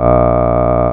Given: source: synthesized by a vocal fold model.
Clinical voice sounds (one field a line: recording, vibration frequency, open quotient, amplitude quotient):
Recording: sustained vowel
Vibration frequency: 60 Hz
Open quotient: 0.4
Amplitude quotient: 1.3